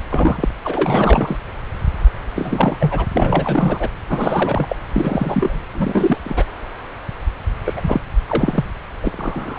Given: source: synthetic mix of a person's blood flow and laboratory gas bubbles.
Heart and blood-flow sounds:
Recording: Doppler ultrasound of blood flow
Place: subclavian vein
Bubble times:
0.10-0.48 s: bubbles
0.64-1.37 s: bubbles
2.35-2.77 s: bubbles
2.80-3.06 s: bubbles
3.12-3.88 s: bubbles
4.09-4.75 s: bubbles
4.93-5.62 s: bubbles
5.74-6.17 s: bubbles
6.23-6.44 s: bubbles
7.65-8.01 s: bubbles
8.28-8.65 s: bubbles
9.04-9.59 s: bubbles
From the record:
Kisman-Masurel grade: 332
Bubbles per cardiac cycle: rolling drumbeat, 9 or more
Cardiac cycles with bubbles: 50 to 99%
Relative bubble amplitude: moderate (0.250 to 0.450)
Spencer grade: 3 (all of the cardiac periods contain showers or single bubble signals, but not dominating or overriding the cardiac motion signals)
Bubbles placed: anywhere in the cardiac cycle

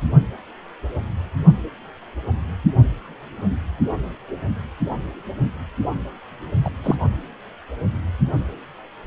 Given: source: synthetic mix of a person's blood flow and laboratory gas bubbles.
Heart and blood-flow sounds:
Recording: Doppler ultrasound of blood flow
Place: precordium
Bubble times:
6.64-6.70 s: bubbles
6.83-6.96 s: bubbles
From the record:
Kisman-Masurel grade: 112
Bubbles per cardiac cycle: 1 to 2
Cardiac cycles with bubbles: 1 to 10%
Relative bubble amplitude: moderate (0.250 to 0.450)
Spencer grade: 1 (occasional bubble signal discernible with the cardiac motion signal, with majority of cardiac periods free of bubbles)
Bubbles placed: only in the low amplitude regions of the cardiac cycle

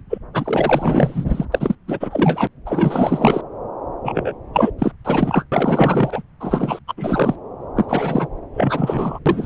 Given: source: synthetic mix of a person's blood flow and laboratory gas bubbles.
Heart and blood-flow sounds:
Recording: Doppler ultrasound of blood flow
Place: subclavian vein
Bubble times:
0.09-0.18 s: bubbles
0.33-1.25 s: bubbles
1.28-1.46 s: bubbles
1.52-1.75 s: bubbles
1.87-2.48 s: bubbles
2.66-3.41 s: bubbles
4.04-4.32 s: bubbles
4.53-4.71 s: bubbles
4.78-4.92 s: bubbles
5.04-5.46 s: bubbles
5.51-6.22 s: bubbles
6.40-6.79 s: bubbles
6.88-6.94 s: bubbles
6.97-7.35 s: bubbles
7.76-8.28 s: bubbles
8.54-9.19 s: bubbles
9.25-9.46 s: bubbles
From the record:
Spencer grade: 4 (maximum detectable bubble signal sounding continuously throughout systole and diastole of every cardiac period, and overriding the amplitude of the normal cardiac signals)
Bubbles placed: anywhere in the cardiac cycle

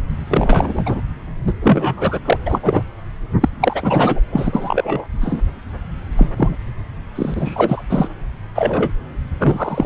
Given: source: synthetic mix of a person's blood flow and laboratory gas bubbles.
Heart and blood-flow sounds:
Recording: Doppler ultrasound of blood flow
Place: subclavian vein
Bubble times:
0.29-1.01 s: bubbles
1.47-1.53 s: bubbles
1.61-2.19 s: bubbles
2.25-2.37 s: bubbles
2.46-2.60 s: bubbles
2.62-2.83 s: bubbles
3.41-3.49 s: bubbles
3.60-4.21 s: bubbles
4.32-5.08 s: bubbles
5.21-5.41 s: bubbles
6.17-6.30 s: bubbles
6.37-6.56 s: bubbles
7.15-7.84 s: bubbles
7.90-8.08 s: bubbles
8.54-8.91 s: bubbles
9.39-9.86 s: bubbles
From the record:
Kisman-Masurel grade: 243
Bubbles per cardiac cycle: several, 3 to 8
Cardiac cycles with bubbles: 100%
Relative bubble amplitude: loud (0.450 to 0.775)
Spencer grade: 3 (all of the cardiac periods contain showers or single bubble signals, but not dominating or overriding the cardiac motion signals)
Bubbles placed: anywhere in the cardiac cycle

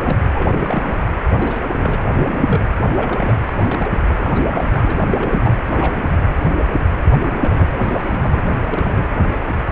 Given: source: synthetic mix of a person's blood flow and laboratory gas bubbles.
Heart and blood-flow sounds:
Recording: Doppler ultrasound of blood flow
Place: precordium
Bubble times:
0.00-0.24 s: bubbles
0.34-1.04 s: bubbles
1.31-2.08 s: bubbles
2.15-2.61 s: bubbles
2.96-3.34 s: bubbles
3.40-3.53 s: bubbles
3.62-3.89 s: bubbles
4.16-4.40 s: bubbles
4.50-4.67 s: bubbles
4.71-5.56 s: bubbles
5.66-6.35 s: bubbles
7.42-8.44 s: bubbles
8.65-9.02 s: bubbles
From the record:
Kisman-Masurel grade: 332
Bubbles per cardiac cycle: rolling drumbeat, 9 or more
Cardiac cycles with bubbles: 50 to 99%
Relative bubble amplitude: moderate (0.250 to 0.450)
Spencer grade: 3 (all of the cardiac periods contain showers or single bubble signals, but not dominating or overriding the cardiac motion signals)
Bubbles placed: anywhere in the cardiac cycle

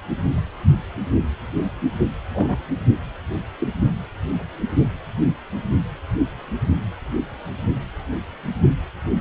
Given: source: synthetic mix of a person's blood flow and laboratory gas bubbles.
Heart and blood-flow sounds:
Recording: Doppler ultrasound of blood flow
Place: precordium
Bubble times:
2.33-2.57 s: bubbles
3.58-3.68 s: bubbles
From the record:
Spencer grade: 2 (many but less than half of the cardiac periods contain bubble signals, singularly or in groups)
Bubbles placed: only in the low amplitude regions of the cardiac cycle

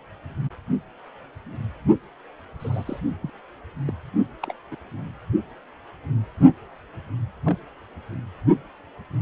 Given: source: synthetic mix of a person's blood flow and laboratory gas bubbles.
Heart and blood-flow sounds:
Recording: Doppler ultrasound of blood flow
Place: precordium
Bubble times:
2.60-2.99 s: bubbles
3.22-3.30 s: bubbles
3.86-3.92 s: bubbles
4.42-4.54 s: bubbles
4.71-4.75 s: bubbles
7.45-7.57 s: bubbles
From the record:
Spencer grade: 2 (many but less than half of the cardiac periods contain bubble signals, singularly or in groups)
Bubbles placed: only in the low amplitude regions of the cardiac cycle

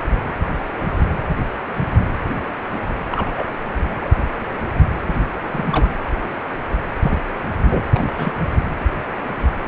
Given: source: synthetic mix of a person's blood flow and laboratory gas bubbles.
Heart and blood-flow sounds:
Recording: Doppler ultrasound of blood flow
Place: precordium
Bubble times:
3.12-3.44 s: bubbles
4.05-4.09 s: bubbles
5.53-5.88 s: bubbles
7.02-7.22 s: bubbles
7.70-7.84 s: bubbles
7.93-8.31 s: bubbles
9.65-9.68 s: bubbles
From the record:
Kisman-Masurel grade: 122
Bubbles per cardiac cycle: 1 to 2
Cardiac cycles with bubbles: 10 to 50%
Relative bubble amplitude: moderate (0.250 to 0.450)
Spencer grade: 2 (many but less than half of the cardiac periods contain bubble signals, singularly or in groups)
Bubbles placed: anywhere in the cardiac cycle

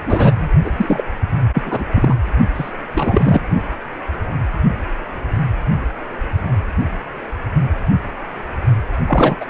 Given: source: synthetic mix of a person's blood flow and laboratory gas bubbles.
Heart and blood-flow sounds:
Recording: Doppler ultrasound of blood flow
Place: precordium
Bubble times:
0.06-0.49 s: bubbles
0.64-0.71 s: bubbles
0.77-1.04 s: bubbles
1.54-1.62 s: bubbles
1.66-1.84 s: bubbles
1.95-2.15 s: bubbles
2.54-2.71 s: bubbles
2.93-3.41 s: bubbles
9.07-9.35 s: bubbles
9.40-9.46 s: bubbles
From the record:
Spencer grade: 3 (all of the cardiac periods contain showers or single bubble signals, but not dominating or overriding the cardiac motion signals)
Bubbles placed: only in the low amplitude regions of the cardiac cycle

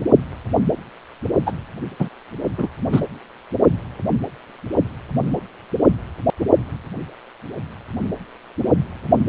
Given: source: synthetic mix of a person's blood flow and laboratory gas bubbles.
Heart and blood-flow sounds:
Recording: Doppler ultrasound of blood flow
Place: precordium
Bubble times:
1.46-1.53 s: bubbles
1.99-2.08 s: bubbles
2.58-2.68 s: bubbles
2.92-3.01 s: bubbles
From the record:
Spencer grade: 2 (many but less than half of the cardiac periods contain bubble signals, singularly or in groups)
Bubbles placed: only in the low amplitude regions of the cardiac cycle

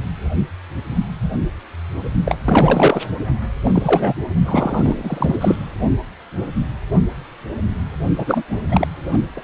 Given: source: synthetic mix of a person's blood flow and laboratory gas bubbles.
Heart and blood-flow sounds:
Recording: Doppler ultrasound of blood flow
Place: precordium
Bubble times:
2.24-2.38 s: bubbles
2.46-3.02 s: bubbles
3.64-4.13 s: bubbles
4.46-5.56 s: bubbles
8.18-8.42 s: bubbles
8.50-8.60 s: bubbles
8.71-8.88 s: bubbles
9.04-9.18 s: bubbles
9.36-9.41 s: bubbles
From the record:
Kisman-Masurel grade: 333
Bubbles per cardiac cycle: rolling drumbeat, 9 or more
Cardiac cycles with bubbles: 50 to 99%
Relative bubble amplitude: loud (0.450 to 0.775)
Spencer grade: 3 (all of the cardiac periods contain showers or single bubble signals, but not dominating or overriding the cardiac motion signals)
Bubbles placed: only in the low amplitude regions of the cardiac cycle

